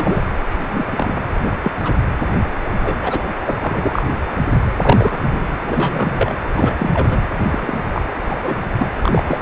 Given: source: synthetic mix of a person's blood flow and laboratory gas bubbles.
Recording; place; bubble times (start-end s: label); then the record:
Doppler ultrasound of blood flow; precordium
0.00-0.22 s: bubbles
0.49-0.86 s: bubbles
0.91-1.20 s: bubbles
1.43-1.50 s: bubbles
1.62-1.72 s: bubbles
1.81-1.94 s: bubbles
2.82-2.96 s: bubbles
3.00-3.24 s: bubbles
3.46-3.52 s: bubbles
3.61-4.03 s: bubbles
4.81-5.43 s: bubbles
5.59-6.33 s: bubbles
6.54-6.75 s: bubbles
6.79-7.20 s: bubbles
7.51-7.77 s: bubbles
7.93-8.03 s: bubbles
8.29-8.40 s: bubbles
8.43-8.57 s: bubbles
8.78-8.88 s: bubbles
9.02-9.23 s: bubbles
9.27-9.40 s: bubbles
From the record:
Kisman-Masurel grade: 243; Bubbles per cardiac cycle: several, 3 to 8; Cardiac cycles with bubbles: 100%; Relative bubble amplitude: loud (0.450 to 0.775); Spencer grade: 3 (all of the cardiac periods contain showers or single bubble signals, but not dominating or overriding the cardiac motion signals); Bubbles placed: anywhere in the cardiac cycle